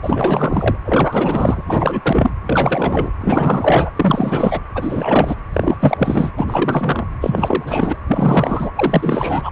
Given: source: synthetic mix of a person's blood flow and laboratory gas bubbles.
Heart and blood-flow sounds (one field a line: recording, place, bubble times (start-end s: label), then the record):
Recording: Doppler ultrasound of blood flow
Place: precordium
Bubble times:
0.02-0.77 s: bubbles
0.85-2.31 s: bubbles
2.46-3.12 s: bubbles
3.20-3.91 s: bubbles
3.96-4.61 s: bubbles
4.75-5.36 s: bubbles
5.53-6.33 s: bubbles
6.37-7.08 s: bubbles
7.21-7.96 s: bubbles
8.08-8.71 s: bubbles
8.75-9.51 s: bubbles
From the record:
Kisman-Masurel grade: 444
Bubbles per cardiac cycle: continuous sound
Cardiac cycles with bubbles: 100%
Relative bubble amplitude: maximal (0.775 to 0.999)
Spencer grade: 4 (maximum detectable bubble signal sounding continuously throughout systole and diastole of every cardiac period, and overriding the amplitude of the normal cardiac signals)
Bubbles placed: anywhere in the cardiac cycle